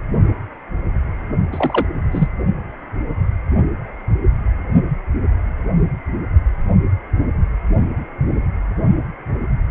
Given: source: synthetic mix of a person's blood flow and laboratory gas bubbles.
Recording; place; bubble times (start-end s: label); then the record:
Doppler ultrasound of blood flow; precordium
1.52-1.85 s: bubbles
2.12-2.28 s: bubbles
From the record:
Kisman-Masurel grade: 223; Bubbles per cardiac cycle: several, 3 to 8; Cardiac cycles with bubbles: 10 to 50%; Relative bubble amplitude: loud (0.450 to 0.775); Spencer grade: 2 (many but less than half of the cardiac periods contain bubble signals, singularly or in groups); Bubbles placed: only in the low amplitude regions of the cardiac cycle